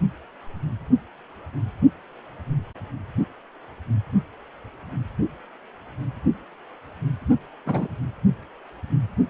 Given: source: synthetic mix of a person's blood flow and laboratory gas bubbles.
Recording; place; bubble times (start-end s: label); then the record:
Doppler ultrasound of blood flow; precordium
7.66-7.88 s: bubbles
From the record:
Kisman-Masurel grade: 112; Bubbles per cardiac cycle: 1 to 2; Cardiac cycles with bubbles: 1 to 10%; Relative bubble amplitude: moderate (0.250 to 0.450); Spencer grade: 1 (occasional bubble signal discernible with the cardiac motion signal, with majority of cardiac periods free of bubbles); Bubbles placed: only in the low amplitude regions of the cardiac cycle